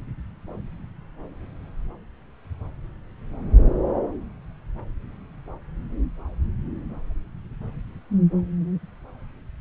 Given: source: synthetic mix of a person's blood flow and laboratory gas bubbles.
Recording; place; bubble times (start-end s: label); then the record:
Doppler ultrasound of blood flow; subclavian vein
no bubbles
From the record:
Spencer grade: 0 (complete lack of bubble signals)